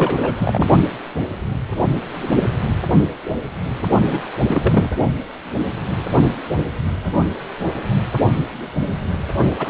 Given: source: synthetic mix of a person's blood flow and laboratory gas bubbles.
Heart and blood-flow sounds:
Doppler ultrasound of blood flow; precordium
0.00-0.33 s: bubbles
0.38-0.69 s: bubbles
4.05-4.29 s: bubbles
4.47-4.90 s: bubbles
9.58-9.70 s: bubbles
From the record:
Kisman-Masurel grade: 332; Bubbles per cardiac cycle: rolling drumbeat, 9 or more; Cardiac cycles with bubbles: 50 to 99%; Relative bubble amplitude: moderate (0.250 to 0.450); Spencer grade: 3 (all of the cardiac periods contain showers or single bubble signals, but not dominating or overriding the cardiac motion signals); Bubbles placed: only in the low amplitude regions of the cardiac cycle

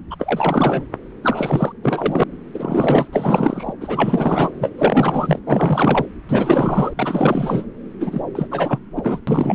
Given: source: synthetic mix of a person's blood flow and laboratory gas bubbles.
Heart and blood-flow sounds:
Doppler ultrasound of blood flow; subclavian vein
0.10-0.15 s: bubbles
0.19-0.84 s: bubbles
1.22-1.72 s: bubbles
1.83-2.23 s: bubbles
2.54-3.08 s: bubbles
3.12-3.73 s: bubbles
3.81-4.51 s: bubbles
4.60-4.70 s: bubbles
4.77-5.39 s: bubbles
5.47-6.05 s: bubbles
6.28-6.93 s: bubbles
6.96-7.66 s: bubbles
8.00-8.23 s: bubbles
8.35-8.47 s: bubbles
8.51-8.79 s: bubbles
8.96-9.20 s: bubbles
9.27-9.55 s: bubbles
From the record:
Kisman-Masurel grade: 444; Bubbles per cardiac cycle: continuous sound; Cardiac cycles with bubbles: 100%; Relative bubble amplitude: maximal (0.775 to 0.999); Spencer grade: 4 (maximum detectable bubble signal sounding continuously throughout systole and diastole of every cardiac period, and overriding the amplitude of the normal cardiac signals); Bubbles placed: anywhere in the cardiac cycle

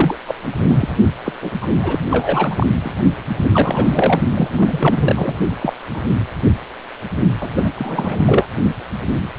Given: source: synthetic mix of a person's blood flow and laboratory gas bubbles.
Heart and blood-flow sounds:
Doppler ultrasound of blood flow; precordium
0.00-0.16 s: bubbles
0.28-0.57 s: bubbles
0.64-0.94 s: bubbles
1.25-1.33 s: bubbles
1.42-1.51 s: bubbles
1.61-1.67 s: bubbles
1.83-2.06 s: bubbles
2.09-2.67 s: bubbles
2.84-2.94 s: bubbles
3.51-4.21 s: bubbles
4.35-5.39 s: bubbles
5.60-5.73 s: bubbles
5.93-6.01 s: bubbles
7.41-7.50 s: bubbles
7.54-7.71 s: bubbles
7.77-8.47 s: bubbles
From the record:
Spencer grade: 3 (all of the cardiac periods contain showers or single bubble signals, but not dominating or overriding the cardiac motion signals); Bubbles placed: only in the low amplitude regions of the cardiac cycle

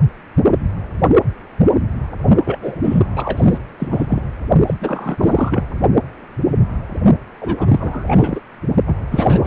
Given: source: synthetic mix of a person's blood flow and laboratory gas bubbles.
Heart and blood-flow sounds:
Doppler ultrasound of blood flow; precordium
2.45-2.58 s: bubbles
2.62-2.75 s: bubbles
2.83-3.06 s: bubbles
3.16-3.60 s: bubbles
3.79-4.21 s: bubbles
4.67-4.74 s: bubbles
4.81-5.64 s: bubbles
7.41-8.40 s: bubbles
8.87-8.96 s: bubbles
9.10-9.47 s: bubbles
From the record:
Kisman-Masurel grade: 333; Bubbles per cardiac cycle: rolling drumbeat, 9 or more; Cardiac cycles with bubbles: 50 to 99%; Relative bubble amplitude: loud (0.450 to 0.775); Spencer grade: 3 (all of the cardiac periods contain showers or single bubble signals, but not dominating or overriding the cardiac motion signals); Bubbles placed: only in the low amplitude regions of the cardiac cycle

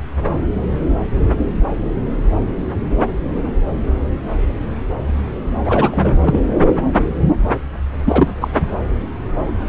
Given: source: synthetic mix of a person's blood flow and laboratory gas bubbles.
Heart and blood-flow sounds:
Doppler ultrasound of blood flow; subclavian vein
5.64-6.39 s: bubbles
8.04-8.33 s: bubbles
8.41-8.48 s: bubbles
From the record:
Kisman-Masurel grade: 223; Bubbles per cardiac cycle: several, 3 to 8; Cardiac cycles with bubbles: 10 to 50%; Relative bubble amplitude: loud (0.450 to 0.775); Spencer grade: 2 (many but less than half of the cardiac periods contain bubble signals, singularly or in groups); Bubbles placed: anywhere in the cardiac cycle

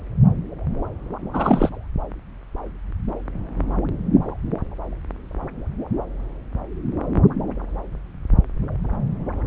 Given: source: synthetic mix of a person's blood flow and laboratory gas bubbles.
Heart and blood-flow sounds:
Doppler ultrasound of blood flow; subclavian vein
1.33-1.69 s: bubbles
From the record:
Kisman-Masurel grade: 212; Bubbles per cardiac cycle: several, 3 to 8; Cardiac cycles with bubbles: 1 to 10%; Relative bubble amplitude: moderate (0.250 to 0.450); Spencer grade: 1 (occasional bubble signal discernible with the cardiac motion signal, with majority of cardiac periods free of bubbles); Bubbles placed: anywhere in the cardiac cycle

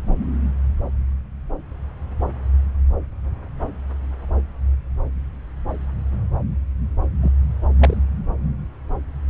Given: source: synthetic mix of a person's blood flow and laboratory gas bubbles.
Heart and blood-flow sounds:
Doppler ultrasound of blood flow; subclavian vein
7.21-7.32 s: bubbles
7.79-8.01 s: bubbles
From the record:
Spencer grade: 1 (occasional bubble signal discernible with the cardiac motion signal, with majority of cardiac periods free of bubbles); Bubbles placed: anywhere in the cardiac cycle

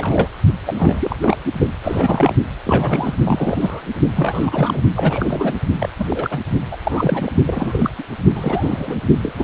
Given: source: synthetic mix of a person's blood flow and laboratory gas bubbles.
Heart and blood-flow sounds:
Doppler ultrasound of blood flow; precordium
0.00-0.32 s: bubbles
0.66-1.16 s: bubbles
1.22-1.38 s: bubbles
1.58-1.67 s: bubbles
1.83-2.35 s: bubbles
2.65-3.15 s: bubbles
3.25-3.82 s: bubbles
4.15-4.82 s: bubbles
4.96-5.54 s: bubbles
5.79-5.89 s: bubbles
5.98-6.41 s: bubbles
6.70-6.77 s: bubbles
6.84-7.32 s: bubbles
7.46-7.90 s: bubbles
7.98-8.04 s: bubbles
8.33-8.98 s: bubbles
9.22-9.32 s: bubbles
9.37-9.44 s: bubbles
From the record:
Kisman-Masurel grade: 342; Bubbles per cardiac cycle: rolling drumbeat, 9 or more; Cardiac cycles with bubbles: 100%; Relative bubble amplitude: moderate (0.250 to 0.450); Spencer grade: 3 (all of the cardiac periods contain showers or single bubble signals, but not dominating or overriding the cardiac motion signals); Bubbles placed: only in the low amplitude regions of the cardiac cycle

